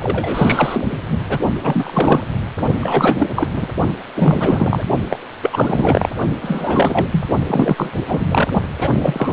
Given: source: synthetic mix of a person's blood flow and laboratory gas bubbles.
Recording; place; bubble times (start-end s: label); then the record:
Doppler ultrasound of blood flow; precordium
0.00-0.85 s: bubbles
0.91-0.96 s: bubbles
1.11-1.17 s: bubbles
1.29-1.38 s: bubbles
1.62-2.21 s: bubbles
2.81-3.27 s: bubbles
3.35-3.48 s: bubbles
3.53-3.67 s: bubbles
4.15-4.83 s: bubbles
5.09-5.19 s: bubbles
5.42-6.09 s: bubbles
6.41-7.09 s: bubbles
7.12-7.27 s: bubbles
7.47-7.90 s: bubbles
8.08-8.26 s: bubbles
8.29-8.50 s: bubbles
8.80-8.94 s: bubbles
9.01-9.33 s: bubbles
From the record:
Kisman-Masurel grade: 343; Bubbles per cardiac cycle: rolling drumbeat, 9 or more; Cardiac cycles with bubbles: 100%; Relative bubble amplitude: loud (0.450 to 0.775); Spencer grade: 3 (all of the cardiac periods contain showers or single bubble signals, but not dominating or overriding the cardiac motion signals); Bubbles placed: only in the low amplitude regions of the cardiac cycle